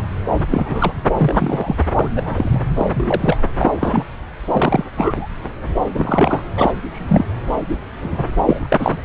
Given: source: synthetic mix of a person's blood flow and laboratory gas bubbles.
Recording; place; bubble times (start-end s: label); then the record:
Doppler ultrasound of blood flow; subclavian vein
0.00-0.02 s: bubbles
0.50-0.93 s: bubbles
1.16-1.75 s: bubbles
1.94-2.08 s: bubbles
2.14-2.61 s: bubbles
2.76-2.85 s: bubbles
2.94-3.38 s: bubbles
3.59-4.06 s: bubbles
4.52-4.84 s: bubbles
4.93-5.29 s: bubbles
5.94-6.41 s: bubbles
6.56-6.72 s: bubbles
6.91-7.28 s: bubbles
7.68-7.75 s: bubbles
8.02-8.31 s: bubbles
8.45-8.97 s: bubbles
From the record:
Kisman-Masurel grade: 243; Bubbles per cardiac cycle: several, 3 to 8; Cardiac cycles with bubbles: 100%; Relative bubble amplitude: loud (0.450 to 0.775); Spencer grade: 3 (all of the cardiac periods contain showers or single bubble signals, but not dominating or overriding the cardiac motion signals); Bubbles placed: anywhere in the cardiac cycle